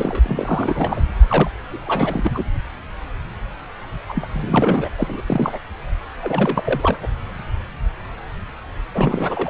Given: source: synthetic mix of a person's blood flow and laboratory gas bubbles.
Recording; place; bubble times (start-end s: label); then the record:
Doppler ultrasound of blood flow; subclavian vein
0.00-0.20 s: bubbles
0.22-1.04 s: bubbles
1.28-1.50 s: bubbles
1.72-2.31 s: bubbles
2.34-2.44 s: bubbles
4.08-4.27 s: bubbles
4.33-4.89 s: bubbles
4.97-5.21 s: bubbles
5.26-5.58 s: bubbles
6.21-6.97 s: bubbles
7.02-7.08 s: bubbles
8.95-9.50 s: bubbles
From the record:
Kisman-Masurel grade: 332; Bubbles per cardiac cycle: rolling drumbeat, 9 or more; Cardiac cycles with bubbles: 50 to 99%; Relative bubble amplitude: moderate (0.250 to 0.450); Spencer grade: 3 (all of the cardiac periods contain showers or single bubble signals, but not dominating or overriding the cardiac motion signals); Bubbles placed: anywhere in the cardiac cycle